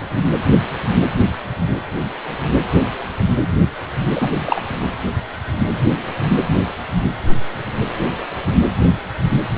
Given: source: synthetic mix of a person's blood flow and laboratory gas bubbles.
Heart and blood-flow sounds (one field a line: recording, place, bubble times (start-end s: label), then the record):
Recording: Doppler ultrasound of blood flow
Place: precordium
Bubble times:
4.15-4.29 s: bubbles
4.45-4.61 s: bubbles
From the record:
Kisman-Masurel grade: 212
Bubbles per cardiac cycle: several, 3 to 8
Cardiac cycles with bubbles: 1 to 10%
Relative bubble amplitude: moderate (0.250 to 0.450)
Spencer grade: 1 (occasional bubble signal discernible with the cardiac motion signal, with majority of cardiac periods free of bubbles)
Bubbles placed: anywhere in the cardiac cycle